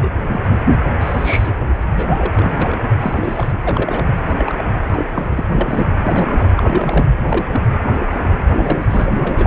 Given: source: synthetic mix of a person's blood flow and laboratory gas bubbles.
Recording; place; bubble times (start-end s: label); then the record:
Doppler ultrasound of blood flow; precordium
0.00-0.11 s: bubbles
0.23-0.41 s: bubbles
0.50-0.55 s: bubbles
0.99-1.55 s: bubbles
1.79-2.33 s: bubbles
2.35-2.78 s: bubbles
3.01-3.51 s: bubbles
3.66-4.03 s: bubbles
4.26-4.71 s: bubbles
4.92-5.04 s: bubbles
5.15-5.25 s: bubbles
5.29-5.45 s: bubbles
5.55-5.98 s: bubbles
6.02-6.53 s: bubbles
6.57-7.06 s: bubbles
7.28-7.45 s: bubbles
7.53-7.62 s: bubbles
8.20-8.84 s: bubbles
8.86-9.47 s: bubbles
From the record:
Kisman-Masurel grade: 242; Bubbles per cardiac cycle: several, 3 to 8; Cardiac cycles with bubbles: 100%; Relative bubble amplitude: moderate (0.250 to 0.450); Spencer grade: 3 (all of the cardiac periods contain showers or single bubble signals, but not dominating or overriding the cardiac motion signals); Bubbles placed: anywhere in the cardiac cycle